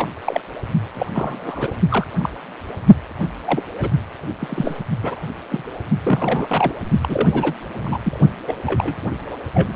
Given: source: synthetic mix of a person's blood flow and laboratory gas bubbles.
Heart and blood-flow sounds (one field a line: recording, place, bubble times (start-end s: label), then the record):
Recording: Doppler ultrasound of blood flow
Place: precordium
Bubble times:
0.00-0.09 s: bubbles
0.25-0.41 s: bubbles
0.94-1.06 s: bubbles
1.14-1.72 s: bubbles
1.89-2.08 s: bubbles
2.20-2.29 s: bubbles
3.45-3.64 s: bubbles
3.78-3.90 s: bubbles
4.39-4.80 s: bubbles
5.02-5.20 s: bubbles
5.50-5.64 s: bubbles
5.89-6.73 s: bubbles
7.01-7.54 s: bubbles
7.75-7.98 s: bubbles
8.03-8.20 s: bubbles
8.47-8.54 s: bubbles
8.66-8.96 s: bubbles
9.54-9.76 s: bubbles
From the record:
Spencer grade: 3 (all of the cardiac periods contain showers or single bubble signals, but not dominating or overriding the cardiac motion signals)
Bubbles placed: only in the low amplitude regions of the cardiac cycle